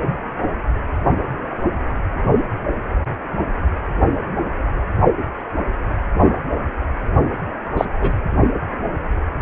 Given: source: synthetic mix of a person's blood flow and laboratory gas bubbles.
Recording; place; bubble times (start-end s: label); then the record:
Doppler ultrasound of blood flow; precordium
7.77-7.85 s: bubbles
8.00-8.12 s: bubbles
From the record:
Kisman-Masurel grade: 113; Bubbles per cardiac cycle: 1 to 2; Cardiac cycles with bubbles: 1 to 10%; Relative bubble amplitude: loud (0.450 to 0.775); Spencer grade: 1 (occasional bubble signal discernible with the cardiac motion signal, with majority of cardiac periods free of bubbles); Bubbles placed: anywhere in the cardiac cycle